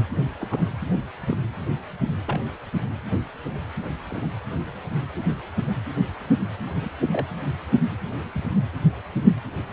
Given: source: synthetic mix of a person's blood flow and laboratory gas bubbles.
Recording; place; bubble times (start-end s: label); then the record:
Doppler ultrasound of blood flow; precordium
0.40-0.63 s: bubbles
1.20-1.36 s: bubbles
2.27-2.41 s: bubbles
3.10-3.17 s: bubbles
4.10-4.32 s: bubbles
6.79-6.90 s: bubbles
7.12-7.26 s: bubbles
8.35-8.43 s: bubbles
From the record:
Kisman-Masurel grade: 121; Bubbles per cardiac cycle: 1 to 2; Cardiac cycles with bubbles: 10 to 50%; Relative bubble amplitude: barely perceptible (0.100 to 0.250); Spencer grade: 2 (many but less than half of the cardiac periods contain bubble signals, singularly or in groups); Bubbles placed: anywhere in the cardiac cycle